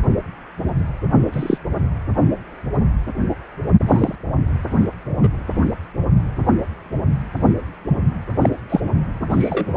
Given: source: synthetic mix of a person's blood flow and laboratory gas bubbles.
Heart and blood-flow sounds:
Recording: Doppler ultrasound of blood flow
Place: precordium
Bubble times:
1.32-1.57 s: bubbles
3.88-4.15 s: bubbles
5.23-5.28 s: bubbles
8.41-8.49 s: bubbles
8.70-8.80 s: bubbles
9.29-9.77 s: bubbles
From the record:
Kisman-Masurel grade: 123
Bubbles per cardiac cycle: 1 to 2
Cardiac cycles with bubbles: 10 to 50%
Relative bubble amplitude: loud (0.450 to 0.775)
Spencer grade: 2 (many but less than half of the cardiac periods contain bubble signals, singularly or in groups)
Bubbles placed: anywhere in the cardiac cycle

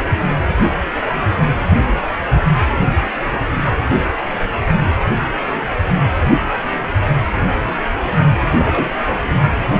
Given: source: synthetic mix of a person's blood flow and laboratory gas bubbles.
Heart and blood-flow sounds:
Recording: Doppler ultrasound of blood flow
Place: precordium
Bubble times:
8.55-8.95 s: bubbles
From the record:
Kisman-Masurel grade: 112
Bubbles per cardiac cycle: 1 to 2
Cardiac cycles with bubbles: 1 to 10%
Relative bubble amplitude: moderate (0.250 to 0.450)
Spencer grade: 1 (occasional bubble signal discernible with the cardiac motion signal, with majority of cardiac periods free of bubbles)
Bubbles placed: anywhere in the cardiac cycle

